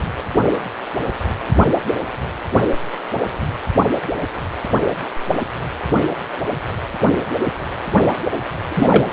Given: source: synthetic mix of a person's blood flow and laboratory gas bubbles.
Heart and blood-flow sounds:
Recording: Doppler ultrasound of blood flow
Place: precordium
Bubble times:
8.68-9.13 s: bubbles
From the record:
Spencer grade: 1 (occasional bubble signal discernible with the cardiac motion signal, with majority of cardiac periods free of bubbles)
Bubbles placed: only in the low amplitude regions of the cardiac cycle

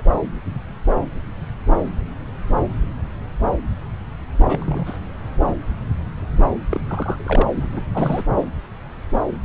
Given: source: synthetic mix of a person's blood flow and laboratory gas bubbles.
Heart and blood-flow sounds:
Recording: Doppler ultrasound of blood flow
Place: subclavian vein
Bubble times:
0.00-0.02 s: bubbles
4.45-4.99 s: bubbles
6.70-6.80 s: bubbles
6.88-7.67 s: bubbles
7.71-7.87 s: bubbles
7.94-8.22 s: bubbles
From the record:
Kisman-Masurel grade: 222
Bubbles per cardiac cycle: several, 3 to 8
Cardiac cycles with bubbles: 10 to 50%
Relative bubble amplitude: moderate (0.250 to 0.450)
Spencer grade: 2 (many but less than half of the cardiac periods contain bubble signals, singularly or in groups)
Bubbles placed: anywhere in the cardiac cycle

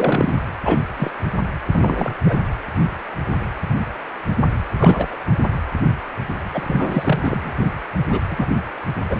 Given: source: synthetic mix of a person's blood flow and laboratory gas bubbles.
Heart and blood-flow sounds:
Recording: Doppler ultrasound of blood flow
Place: precordium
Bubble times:
0.00-0.40 s: bubbles
0.65-0.79 s: bubbles
0.96-1.10 s: bubbles
1.73-2.18 s: bubbles
2.24-2.38 s: bubbles
4.74-5.17 s: bubbles
6.52-7.20 s: bubbles
7.23-7.52 s: bubbles
7.58-7.67 s: bubbles
8.09-8.21 s: bubbles
8.29-8.47 s: bubbles
9.09-9.20 s: bubbles
From the record:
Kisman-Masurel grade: 232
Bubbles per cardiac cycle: several, 3 to 8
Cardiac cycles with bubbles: 50 to 99%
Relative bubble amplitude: moderate (0.250 to 0.450)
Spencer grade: 3 (all of the cardiac periods contain showers or single bubble signals, but not dominating or overriding the cardiac motion signals)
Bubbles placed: anywhere in the cardiac cycle

